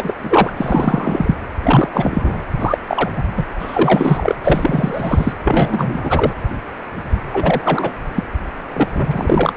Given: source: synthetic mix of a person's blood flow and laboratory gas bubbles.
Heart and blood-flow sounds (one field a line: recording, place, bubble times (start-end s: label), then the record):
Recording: Doppler ultrasound of blood flow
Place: precordium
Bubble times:
0.00-0.13 s: bubbles
0.23-0.53 s: bubbles
0.56-1.36 s: bubbles
1.63-1.88 s: bubbles
1.93-2.45 s: bubbles
2.59-2.77 s: bubbles
2.87-3.12 s: bubbles
3.15-3.24 s: bubbles
3.36-3.46 s: bubbles
3.59-4.35 s: bubbles
4.44-5.33 s: bubbles
5.44-6.33 s: bubbles
7.33-7.92 s: bubbles
8.14-8.23 s: bubbles
8.74-8.88 s: bubbles
8.92-9.53 s: bubbles
From the record:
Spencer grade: 3 (all of the cardiac periods contain showers or single bubble signals, but not dominating or overriding the cardiac motion signals)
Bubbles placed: anywhere in the cardiac cycle